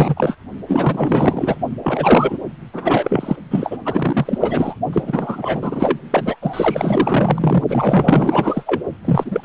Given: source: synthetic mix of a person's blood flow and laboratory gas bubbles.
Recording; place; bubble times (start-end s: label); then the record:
Doppler ultrasound of blood flow; precordium
0.00-0.36 s: bubbles
0.68-1.56 s: bubbles
1.82-2.38 s: bubbles
2.73-3.36 s: bubbles
3.50-3.77 s: bubbles
3.85-4.75 s: bubbles
4.92-5.98 s: bubbles
6.10-6.36 s: bubbles
6.42-7.64 s: bubbles
7.69-8.63 s: bubbles
8.66-8.81 s: bubbles
9.04-9.45 s: bubbles
From the record:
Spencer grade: 4 (maximum detectable bubble signal sounding continuously throughout systole and diastole of every cardiac period, and overriding the amplitude of the normal cardiac signals); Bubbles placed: only in the low amplitude regions of the cardiac cycle